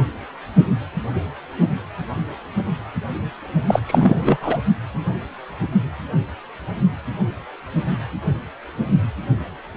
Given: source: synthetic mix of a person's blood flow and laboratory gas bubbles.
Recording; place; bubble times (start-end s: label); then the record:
Doppler ultrasound of blood flow; precordium
3.68-3.80 s: bubbles
3.87-4.38 s: bubbles
4.42-4.58 s: bubbles
From the record:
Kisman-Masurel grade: 223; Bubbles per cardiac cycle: several, 3 to 8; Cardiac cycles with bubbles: 10 to 50%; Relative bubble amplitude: loud (0.450 to 0.775); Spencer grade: 2 (many but less than half of the cardiac periods contain bubble signals, singularly or in groups); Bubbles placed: only in the low amplitude regions of the cardiac cycle